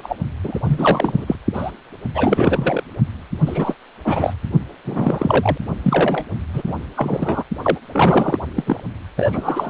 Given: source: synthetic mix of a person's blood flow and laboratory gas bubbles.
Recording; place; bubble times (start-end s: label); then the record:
Doppler ultrasound of blood flow; precordium
0.00-0.17 s: bubbles
0.44-0.60 s: bubbles
0.64-1.35 s: bubbles
1.53-1.72 s: bubbles
2.15-2.84 s: bubbles
3.46-3.75 s: bubbles
4.04-4.33 s: bubbles
4.84-5.58 s: bubbles
5.83-6.25 s: bubbles
6.54-6.62 s: bubbles
6.65-6.74 s: bubbles
6.96-7.44 s: bubbles
7.62-7.78 s: bubbles
7.92-8.39 s: bubbles
8.54-8.82 s: bubbles
9.17-9.70 s: bubbles
From the record:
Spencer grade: 3 (all of the cardiac periods contain showers or single bubble signals, but not dominating or overriding the cardiac motion signals); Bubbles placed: only in the low amplitude regions of the cardiac cycle